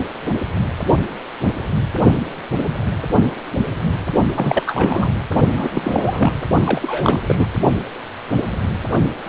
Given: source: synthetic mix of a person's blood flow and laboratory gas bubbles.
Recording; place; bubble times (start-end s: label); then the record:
Doppler ultrasound of blood flow; precordium
4.35-5.09 s: bubbles
5.54-6.33 s: bubbles
6.65-7.20 s: bubbles
7.26-7.47 s: bubbles
From the record:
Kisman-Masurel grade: 332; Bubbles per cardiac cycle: rolling drumbeat, 9 or more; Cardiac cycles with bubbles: 50 to 99%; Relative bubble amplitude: moderate (0.250 to 0.450); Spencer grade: 3 (all of the cardiac periods contain showers or single bubble signals, but not dominating or overriding the cardiac motion signals); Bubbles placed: only in the low amplitude regions of the cardiac cycle